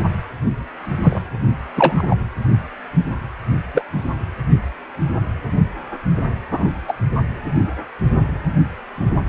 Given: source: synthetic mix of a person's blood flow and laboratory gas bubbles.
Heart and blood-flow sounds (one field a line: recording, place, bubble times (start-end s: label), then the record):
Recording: Doppler ultrasound of blood flow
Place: precordium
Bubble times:
1.03-1.21 s: bubbles
1.77-2.15 s: bubbles
3.74-3.85 s: bubbles
6.51-6.69 s: bubbles
6.88-6.93 s: bubbles
From the record:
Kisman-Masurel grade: 123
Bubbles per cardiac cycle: 1 to 2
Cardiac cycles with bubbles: 10 to 50%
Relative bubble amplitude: loud (0.450 to 0.775)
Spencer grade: 2 (many but less than half of the cardiac periods contain bubble signals, singularly or in groups)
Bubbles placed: anywhere in the cardiac cycle